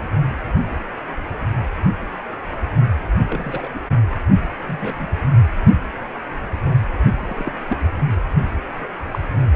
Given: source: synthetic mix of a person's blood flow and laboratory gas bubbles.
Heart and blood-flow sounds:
Doppler ultrasound of blood flow; precordium
3.31-3.68 s: bubbles
3.74-3.80 s: bubbles
4.67-5.08 s: bubbles
7.08-7.53 s: bubbles
7.69-7.78 s: bubbles
9.11-9.19 s: bubbles
9.39-9.47 s: bubbles
From the record:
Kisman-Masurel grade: 121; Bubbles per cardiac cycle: 1 to 2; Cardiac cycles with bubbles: 10 to 50%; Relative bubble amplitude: barely perceptible (0.100 to 0.250); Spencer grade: 2 (many but less than half of the cardiac periods contain bubble signals, singularly or in groups); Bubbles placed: anywhere in the cardiac cycle

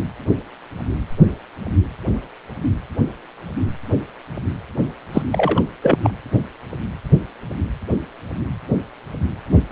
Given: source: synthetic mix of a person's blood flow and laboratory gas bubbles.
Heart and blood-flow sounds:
Doppler ultrasound of blood flow; precordium
5.12-5.22 s: bubbles
5.32-5.62 s: bubbles
5.81-5.98 s: bubbles
6.02-6.10 s: bubbles
From the record:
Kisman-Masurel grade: 223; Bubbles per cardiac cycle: several, 3 to 8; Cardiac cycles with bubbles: 10 to 50%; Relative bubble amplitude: loud (0.450 to 0.775); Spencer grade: 2 (many but less than half of the cardiac periods contain bubble signals, singularly or in groups); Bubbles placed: anywhere in the cardiac cycle

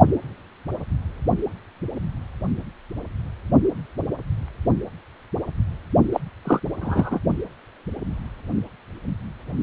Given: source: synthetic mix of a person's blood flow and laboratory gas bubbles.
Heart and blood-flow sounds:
Doppler ultrasound of blood flow; precordium
6.12-6.20 s: bubbles
6.45-6.59 s: bubbles
6.80-7.20 s: bubbles
From the record:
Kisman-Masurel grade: 212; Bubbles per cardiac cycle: several, 3 to 8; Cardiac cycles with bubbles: 1 to 10%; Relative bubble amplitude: moderate (0.250 to 0.450); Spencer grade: 1 (occasional bubble signal discernible with the cardiac motion signal, with majority of cardiac periods free of bubbles); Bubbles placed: only in the low amplitude regions of the cardiac cycle

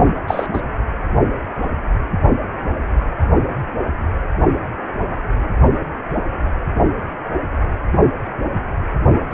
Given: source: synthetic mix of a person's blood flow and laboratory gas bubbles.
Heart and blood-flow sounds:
Doppler ultrasound of blood flow; precordium
0.27-0.48 s: bubbles
0.53-0.61 s: bubbles
9.30-9.34 s: bubbles
From the record:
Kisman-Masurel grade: 123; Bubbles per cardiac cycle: 1 to 2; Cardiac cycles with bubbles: 10 to 50%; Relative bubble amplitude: loud (0.450 to 0.775); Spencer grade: 2 (many but less than half of the cardiac periods contain bubble signals, singularly or in groups); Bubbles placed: only in the low amplitude regions of the cardiac cycle

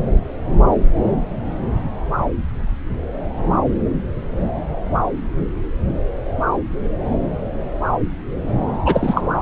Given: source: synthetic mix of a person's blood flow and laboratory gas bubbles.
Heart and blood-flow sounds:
Doppler ultrasound of blood flow; subclavian vein
8.86-9.22 s: bubbles
From the record:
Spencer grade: 1 (occasional bubble signal discernible with the cardiac motion signal, with majority of cardiac periods free of bubbles); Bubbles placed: anywhere in the cardiac cycle

